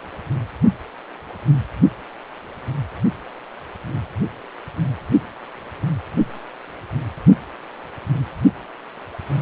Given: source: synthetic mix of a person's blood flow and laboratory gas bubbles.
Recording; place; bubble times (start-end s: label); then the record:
Doppler ultrasound of blood flow; precordium
no bubbles
From the record:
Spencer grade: 0 (complete lack of bubble signals)